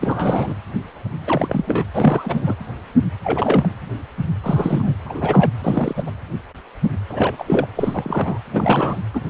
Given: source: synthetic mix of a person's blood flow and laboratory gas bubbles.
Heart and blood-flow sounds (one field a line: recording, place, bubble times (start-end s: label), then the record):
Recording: Doppler ultrasound of blood flow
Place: precordium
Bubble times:
0.01-0.56 s: bubbles
1.27-1.84 s: bubbles
1.94-2.56 s: bubbles
3.24-3.76 s: bubbles
4.43-4.95 s: bubbles
5.04-5.51 s: bubbles
5.63-6.04 s: bubbles
6.07-6.11 s: bubbles
7.11-7.45 s: bubbles
7.48-7.67 s: bubbles
7.75-8.38 s: bubbles
8.52-9.01 s: bubbles
9.13-9.21 s: bubbles
From the record:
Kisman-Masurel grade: 332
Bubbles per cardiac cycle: rolling drumbeat, 9 or more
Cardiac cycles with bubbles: 50 to 99%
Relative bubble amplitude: moderate (0.250 to 0.450)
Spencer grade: 3 (all of the cardiac periods contain showers or single bubble signals, but not dominating or overriding the cardiac motion signals)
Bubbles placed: anywhere in the cardiac cycle